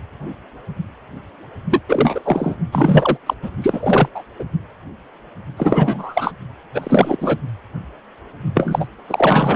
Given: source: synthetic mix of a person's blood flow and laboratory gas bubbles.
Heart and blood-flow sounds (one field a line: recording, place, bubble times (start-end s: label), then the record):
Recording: Doppler ultrasound of blood flow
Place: precordium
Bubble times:
1.71-1.81 s: bubbles
1.88-2.21 s: bubbles
2.24-2.55 s: bubbles
2.71-3.17 s: bubbles
3.26-3.34 s: bubbles
3.42-3.50 s: bubbles
3.62-4.09 s: bubbles
4.14-4.23 s: bubbles
4.38-4.44 s: bubbles
5.56-6.33 s: bubbles
6.74-7.17 s: bubbles
7.21-7.38 s: bubbles
8.54-8.88 s: bubbles
9.09-9.56 s: bubbles
From the record:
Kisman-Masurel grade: 333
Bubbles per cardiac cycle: rolling drumbeat, 9 or more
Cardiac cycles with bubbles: 50 to 99%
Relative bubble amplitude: loud (0.450 to 0.775)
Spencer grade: 3 (all of the cardiac periods contain showers or single bubble signals, but not dominating or overriding the cardiac motion signals)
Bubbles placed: only in the low amplitude regions of the cardiac cycle